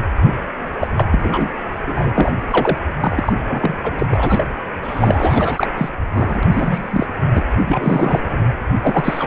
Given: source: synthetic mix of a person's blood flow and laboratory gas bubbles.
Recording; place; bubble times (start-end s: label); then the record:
Doppler ultrasound of blood flow; precordium
0.23-0.37 s: bubbles
0.81-0.87 s: bubbles
0.97-1.04 s: bubbles
1.11-1.50 s: bubbles
1.86-2.10 s: bubbles
2.14-2.32 s: bubbles
2.50-2.78 s: bubbles
3.00-3.33 s: bubbles
3.49-3.95 s: bubbles
3.98-4.07 s: bubbles
4.11-4.47 s: bubbles
4.83-5.67 s: bubbles
5.78-5.89 s: bubbles
6.11-6.48 s: bubbles
6.52-7.07 s: bubbles
7.35-7.44 s: bubbles
7.60-8.38 s: bubbles
8.81-9.27 s: bubbles
From the record:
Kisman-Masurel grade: 342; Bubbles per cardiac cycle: rolling drumbeat, 9 or more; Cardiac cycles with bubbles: 100%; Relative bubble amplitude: moderate (0.250 to 0.450); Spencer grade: 3 (all of the cardiac periods contain showers or single bubble signals, but not dominating or overriding the cardiac motion signals); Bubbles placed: anywhere in the cardiac cycle